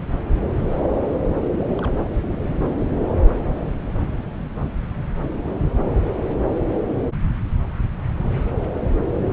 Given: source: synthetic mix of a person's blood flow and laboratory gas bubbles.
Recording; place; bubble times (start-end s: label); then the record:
Doppler ultrasound of blood flow; subclavian vein
0.27-0.43 s: bubbles
0.56-0.80 s: bubbles
1.51-1.59 s: bubbles
1.78-1.91 s: bubbles
From the record:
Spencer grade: 2 (many but less than half of the cardiac periods contain bubble signals, singularly or in groups); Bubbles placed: anywhere in the cardiac cycle